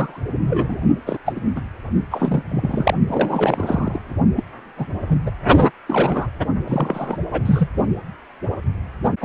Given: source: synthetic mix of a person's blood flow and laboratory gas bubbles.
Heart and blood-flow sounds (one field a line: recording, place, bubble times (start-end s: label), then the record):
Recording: Doppler ultrasound of blood flow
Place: precordium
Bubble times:
0.00-0.21 s: bubbles
0.46-0.77 s: bubbles
1.06-1.18 s: bubbles
1.25-1.41 s: bubbles
1.55-1.61 s: bubbles
2.10-2.43 s: bubbles
2.49-2.95 s: bubbles
3.08-4.02 s: bubbles
4.36-4.44 s: bubbles
4.78-4.87 s: bubbles
5.08-5.21 s: bubbles
5.25-5.31 s: bubbles
5.86-6.27 s: bubbles
6.65-7.17 s: bubbles
7.31-7.69 s: bubbles
9.21-9.25 s: bubbles
From the record:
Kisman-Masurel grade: 243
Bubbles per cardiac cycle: several, 3 to 8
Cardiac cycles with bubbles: 100%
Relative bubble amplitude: loud (0.450 to 0.775)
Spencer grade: 3 (all of the cardiac periods contain showers or single bubble signals, but not dominating or overriding the cardiac motion signals)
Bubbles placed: only in the low amplitude regions of the cardiac cycle